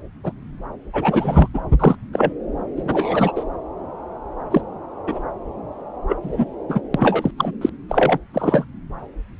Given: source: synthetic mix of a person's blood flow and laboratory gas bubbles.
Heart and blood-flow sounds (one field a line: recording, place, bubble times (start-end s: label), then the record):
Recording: Doppler ultrasound of blood flow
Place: subclavian vein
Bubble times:
0.23-0.32 s: bubbles
0.93-1.48 s: bubbles
1.54-1.61 s: bubbles
1.79-1.96 s: bubbles
2.13-2.33 s: bubbles
2.76-3.32 s: bubbles
3.35-3.44 s: bubbles
4.51-4.63 s: bubbles
5.07-5.23 s: bubbles
6.09-6.16 s: bubbles
6.23-6.45 s: bubbles
6.69-6.80 s: bubbles
6.94-7.31 s: bubbles
7.37-7.51 s: bubbles
7.61-7.70 s: bubbles
7.88-8.19 s: bubbles
8.33-8.65 s: bubbles
From the record:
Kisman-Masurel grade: 233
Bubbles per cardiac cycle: several, 3 to 8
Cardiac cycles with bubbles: 50 to 99%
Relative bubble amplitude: loud (0.450 to 0.775)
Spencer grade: 3 (all of the cardiac periods contain showers or single bubble signals, but not dominating or overriding the cardiac motion signals)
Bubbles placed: anywhere in the cardiac cycle